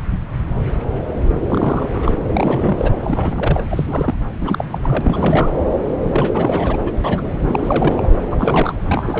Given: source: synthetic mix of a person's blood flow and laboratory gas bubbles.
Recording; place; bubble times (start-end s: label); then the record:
Doppler ultrasound of blood flow; subclavian vein
1.49-2.17 s: bubbles
2.31-2.92 s: bubbles
3.01-3.62 s: bubbles
3.71-4.19 s: bubbles
4.41-4.64 s: bubbles
4.72-4.79 s: bubbles
4.83-5.01 s: bubbles
5.04-5.52 s: bubbles
6.08-6.77 s: bubbles
6.81-6.92 s: bubbles
7.04-7.35 s: bubbles
7.47-8.07 s: bubbles
8.31-8.75 s: bubbles
8.89-9.20 s: bubbles
From the record:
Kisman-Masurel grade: 332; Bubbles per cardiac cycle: rolling drumbeat, 9 or more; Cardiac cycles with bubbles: 50 to 99%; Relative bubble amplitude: moderate (0.250 to 0.450); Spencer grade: 3 (all of the cardiac periods contain showers or single bubble signals, but not dominating or overriding the cardiac motion signals); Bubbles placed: anywhere in the cardiac cycle